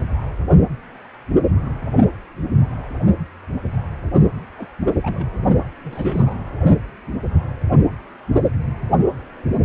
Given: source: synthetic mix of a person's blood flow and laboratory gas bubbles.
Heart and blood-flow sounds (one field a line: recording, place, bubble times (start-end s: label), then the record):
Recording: Doppler ultrasound of blood flow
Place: precordium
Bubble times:
4.58-4.67 s: bubbles
5.02-5.31 s: bubbles
5.84-6.34 s: bubbles
From the record:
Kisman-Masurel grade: 221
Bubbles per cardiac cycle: several, 3 to 8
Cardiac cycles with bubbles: 10 to 50%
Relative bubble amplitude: barely perceptible (0.100 to 0.250)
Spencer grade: 2 (many but less than half of the cardiac periods contain bubble signals, singularly or in groups)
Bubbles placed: only in the low amplitude regions of the cardiac cycle